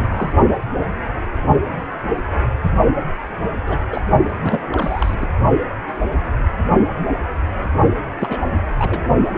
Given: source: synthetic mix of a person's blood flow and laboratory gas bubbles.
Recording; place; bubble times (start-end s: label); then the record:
Doppler ultrasound of blood flow; precordium
0.00-0.31 s: bubbles
3.67-3.77 s: bubbles
3.90-4.01 s: bubbles
4.43-4.61 s: bubbles
4.72-5.27 s: bubbles
8.20-8.38 s: bubbles
8.78-9.00 s: bubbles
From the record:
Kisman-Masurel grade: 222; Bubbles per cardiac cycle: several, 3 to 8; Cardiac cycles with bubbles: 10 to 50%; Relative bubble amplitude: moderate (0.250 to 0.450); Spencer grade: 2 (many but less than half of the cardiac periods contain bubble signals, singularly or in groups); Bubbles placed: only in the low amplitude regions of the cardiac cycle